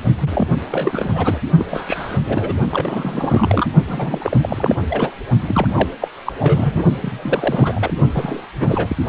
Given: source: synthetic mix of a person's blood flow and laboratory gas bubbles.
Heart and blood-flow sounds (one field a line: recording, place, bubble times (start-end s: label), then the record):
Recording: Doppler ultrasound of blood flow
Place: precordium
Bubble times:
0.19-0.47 s: bubbles
0.68-1.38 s: bubbles
1.58-1.65 s: bubbles
1.69-2.18 s: bubbles
2.26-2.53 s: bubbles
2.71-3.67 s: bubbles
3.87-4.37 s: bubbles
4.40-4.79 s: bubbles
4.89-5.12 s: bubbles
5.42-5.67 s: bubbles
5.75-5.88 s: bubbles
6.00-6.08 s: bubbles
6.25-6.33 s: bubbles
6.39-6.83 s: bubbles
7.01-7.93 s: bubbles
8.14-8.46 s: bubbles
8.55-8.96 s: bubbles
From the record:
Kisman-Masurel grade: 342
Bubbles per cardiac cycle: rolling drumbeat, 9 or more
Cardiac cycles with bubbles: 100%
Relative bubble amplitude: moderate (0.250 to 0.450)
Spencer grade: 3 (all of the cardiac periods contain showers or single bubble signals, but not dominating or overriding the cardiac motion signals)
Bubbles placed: only in the low amplitude regions of the cardiac cycle